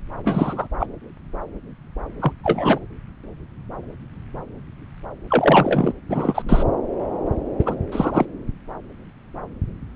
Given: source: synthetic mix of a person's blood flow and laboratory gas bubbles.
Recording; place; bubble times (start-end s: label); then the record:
Doppler ultrasound of blood flow; subclavian vein
0.24-0.68 s: bubbles
0.79-0.86 s: bubbles
2.19-2.33 s: bubbles
2.44-2.79 s: bubbles
5.30-5.93 s: bubbles
6.09-6.42 s: bubbles
6.49-6.63 s: bubbles
7.58-7.75 s: bubbles
7.92-8.26 s: bubbles
From the record:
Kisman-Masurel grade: 223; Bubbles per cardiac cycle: several, 3 to 8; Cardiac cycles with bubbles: 10 to 50%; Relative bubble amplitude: loud (0.450 to 0.775); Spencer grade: 2 (many but less than half of the cardiac periods contain bubble signals, singularly or in groups); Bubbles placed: anywhere in the cardiac cycle